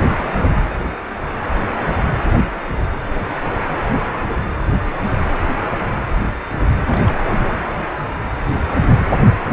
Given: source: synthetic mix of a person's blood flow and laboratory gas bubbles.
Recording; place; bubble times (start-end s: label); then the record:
Doppler ultrasound of blood flow; precordium
6.86-7.22 s: bubbles
From the record:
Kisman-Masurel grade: 211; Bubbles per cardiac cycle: several, 3 to 8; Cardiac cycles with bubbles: 1 to 10%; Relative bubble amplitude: barely perceptible (0.100 to 0.250); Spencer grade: 1 (occasional bubble signal discernible with the cardiac motion signal, with majority of cardiac periods free of bubbles); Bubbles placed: anywhere in the cardiac cycle